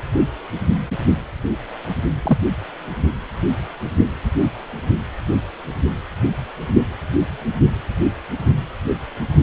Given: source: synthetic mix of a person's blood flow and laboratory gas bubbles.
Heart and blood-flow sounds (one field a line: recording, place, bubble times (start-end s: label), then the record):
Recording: Doppler ultrasound of blood flow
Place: precordium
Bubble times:
2.23-2.38 s: bubbles
From the record:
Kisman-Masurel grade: 122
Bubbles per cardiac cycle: 1 to 2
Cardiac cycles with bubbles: 10 to 50%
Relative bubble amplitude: moderate (0.250 to 0.450)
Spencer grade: 2 (many but less than half of the cardiac periods contain bubble signals, singularly or in groups)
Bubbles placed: anywhere in the cardiac cycle